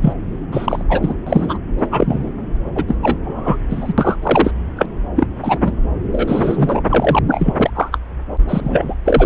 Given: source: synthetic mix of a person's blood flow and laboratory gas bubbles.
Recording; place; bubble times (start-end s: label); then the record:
Doppler ultrasound of blood flow; subclavian vein
0.02-0.13 s: bubbles
0.52-0.83 s: bubbles
0.89-1.15 s: bubbles
1.27-1.58 s: bubbles
1.79-1.87 s: bubbles
1.91-2.29 s: bubbles
2.75-2.84 s: bubbles
2.88-2.96 s: bubbles
3.02-3.17 s: bubbles
3.23-3.56 s: bubbles
3.69-3.93 s: bubbles
3.98-4.16 s: bubbles
4.22-4.52 s: bubbles
4.76-4.88 s: bubbles
5.15-5.27 s: bubbles
5.43-5.72 s: bubbles
6.11-6.82 s: bubbles
6.89-7.19 s: bubbles
7.28-7.70 s: bubbles
7.74-7.98 s: bubbles
8.48-8.96 s: bubbles
9.05-9.26 s: bubbles
From the record:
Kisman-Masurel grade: 243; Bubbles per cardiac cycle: several, 3 to 8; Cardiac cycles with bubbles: 100%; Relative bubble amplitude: loud (0.450 to 0.775); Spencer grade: 3 (all of the cardiac periods contain showers or single bubble signals, but not dominating or overriding the cardiac motion signals); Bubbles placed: anywhere in the cardiac cycle